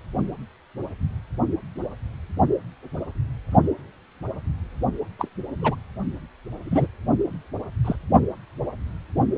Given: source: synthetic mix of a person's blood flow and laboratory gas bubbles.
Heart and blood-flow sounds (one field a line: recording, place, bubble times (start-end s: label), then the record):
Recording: Doppler ultrasound of blood flow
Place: precordium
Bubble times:
5.18-5.29 s: bubbles
5.61-5.75 s: bubbles
6.63-6.88 s: bubbles
7.84-7.96 s: bubbles
9.36-9.38 s: bubbles
From the record:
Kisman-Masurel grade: 122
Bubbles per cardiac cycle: 1 to 2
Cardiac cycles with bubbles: 10 to 50%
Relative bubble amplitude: moderate (0.250 to 0.450)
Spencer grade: 2 (many but less than half of the cardiac periods contain bubble signals, singularly or in groups)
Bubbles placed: only in the low amplitude regions of the cardiac cycle